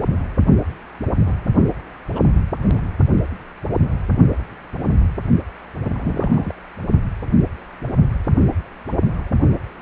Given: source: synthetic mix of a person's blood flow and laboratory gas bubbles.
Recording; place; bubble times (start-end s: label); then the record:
Doppler ultrasound of blood flow; precordium
1.26-1.33 s: bubbles
2.15-2.20 s: bubbles
2.64-2.80 s: bubbles
5.83-6.53 s: bubbles
From the record:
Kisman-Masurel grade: 121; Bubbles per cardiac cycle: 1 to 2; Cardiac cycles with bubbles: 10 to 50%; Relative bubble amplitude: barely perceptible (0.100 to 0.250); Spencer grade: 2 (many but less than half of the cardiac periods contain bubble signals, singularly or in groups); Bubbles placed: only in the low amplitude regions of the cardiac cycle